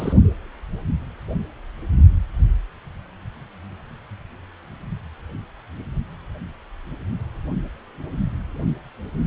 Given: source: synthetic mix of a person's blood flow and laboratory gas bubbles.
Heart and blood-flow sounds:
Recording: Doppler ultrasound of blood flow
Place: precordium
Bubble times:
0.00-0.13 s: bubbles
From the record:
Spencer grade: 1 (occasional bubble signal discernible with the cardiac motion signal, with majority of cardiac periods free of bubbles)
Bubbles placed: only in the low amplitude regions of the cardiac cycle

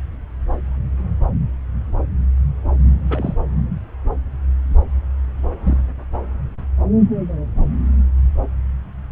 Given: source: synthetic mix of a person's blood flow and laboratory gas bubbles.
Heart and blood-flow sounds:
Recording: Doppler ultrasound of blood flow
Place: subclavian vein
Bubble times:
3.08-3.33 s: bubbles
5.63-5.78 s: bubbles
From the record:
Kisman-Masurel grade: 121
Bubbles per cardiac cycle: 1 to 2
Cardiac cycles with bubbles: 10 to 50%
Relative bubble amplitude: barely perceptible (0.100 to 0.250)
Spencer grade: 2 (many but less than half of the cardiac periods contain bubble signals, singularly or in groups)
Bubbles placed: anywhere in the cardiac cycle

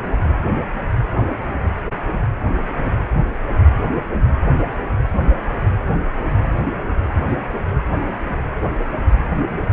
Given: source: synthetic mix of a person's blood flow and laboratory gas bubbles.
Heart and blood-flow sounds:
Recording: Doppler ultrasound of blood flow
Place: precordium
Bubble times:
5.23-5.33 s: bubbles
From the record:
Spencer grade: 1 (occasional bubble signal discernible with the cardiac motion signal, with majority of cardiac periods free of bubbles)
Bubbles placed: anywhere in the cardiac cycle

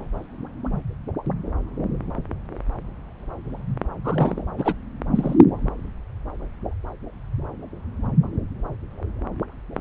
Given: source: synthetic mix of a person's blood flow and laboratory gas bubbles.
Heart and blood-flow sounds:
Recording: Doppler ultrasound of blood flow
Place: subclavian vein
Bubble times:
4.04-4.42 s: bubbles
4.58-4.74 s: bubbles
5.15-5.36 s: bubbles
9.77-9.81 s: bubbles
From the record:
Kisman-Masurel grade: 222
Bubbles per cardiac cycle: several, 3 to 8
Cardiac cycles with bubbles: 10 to 50%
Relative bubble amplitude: moderate (0.250 to 0.450)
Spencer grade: 2 (many but less than half of the cardiac periods contain bubble signals, singularly or in groups)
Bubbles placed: anywhere in the cardiac cycle

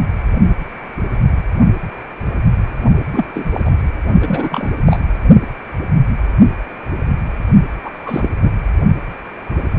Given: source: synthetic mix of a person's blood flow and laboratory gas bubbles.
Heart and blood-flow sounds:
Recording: Doppler ultrasound of blood flow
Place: precordium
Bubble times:
3.12-3.25 s: bubbles
3.34-3.46 s: bubbles
3.53-3.61 s: bubbles
3.65-3.71 s: bubbles
4.22-4.77 s: bubbles
4.86-5.00 s: bubbles
7.83-7.91 s: bubbles
8.05-8.29 s: bubbles
8.41-8.50 s: bubbles
From the record:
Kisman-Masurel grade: 222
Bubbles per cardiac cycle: several, 3 to 8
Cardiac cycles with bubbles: 10 to 50%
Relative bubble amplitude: moderate (0.250 to 0.450)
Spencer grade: 2 (many but less than half of the cardiac periods contain bubble signals, singularly or in groups)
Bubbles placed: only in the low amplitude regions of the cardiac cycle

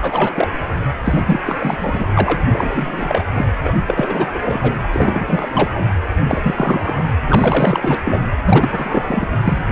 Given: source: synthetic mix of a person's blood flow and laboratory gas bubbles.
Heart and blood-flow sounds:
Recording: Doppler ultrasound of blood flow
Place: precordium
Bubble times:
0.00-0.48 s: bubbles
1.04-1.21 s: bubbles
1.25-1.40 s: bubbles
1.46-2.06 s: bubbles
2.15-2.42 s: bubbles
2.52-3.22 s: bubbles
3.33-3.46 s: bubbles
3.63-3.73 s: bubbles
3.86-4.39 s: bubbles
4.44-4.75 s: bubbles
4.92-5.49 s: bubbles
5.54-5.70 s: bubbles
5.73-5.91 s: bubbles
6.26-7.04 s: bubbles
7.29-7.98 s: bubbles
8.04-8.25 s: bubbles
8.44-9.28 s: bubbles
9.44-9.62 s: bubbles
From the record:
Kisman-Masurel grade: 343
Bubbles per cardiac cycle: rolling drumbeat, 9 or more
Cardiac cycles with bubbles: 100%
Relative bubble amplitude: loud (0.450 to 0.775)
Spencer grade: 3 (all of the cardiac periods contain showers or single bubble signals, but not dominating or overriding the cardiac motion signals)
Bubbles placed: anywhere in the cardiac cycle

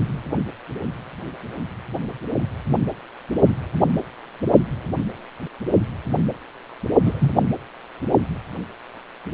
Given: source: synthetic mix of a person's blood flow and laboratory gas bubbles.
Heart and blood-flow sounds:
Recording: Doppler ultrasound of blood flow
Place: precordium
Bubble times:
7.04-7.30 s: bubbles
From the record:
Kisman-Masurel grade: 113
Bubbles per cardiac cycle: 1 to 2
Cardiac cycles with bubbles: 1 to 10%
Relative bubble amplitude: loud (0.450 to 0.775)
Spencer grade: 1 (occasional bubble signal discernible with the cardiac motion signal, with majority of cardiac periods free of bubbles)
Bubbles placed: only in the low amplitude regions of the cardiac cycle

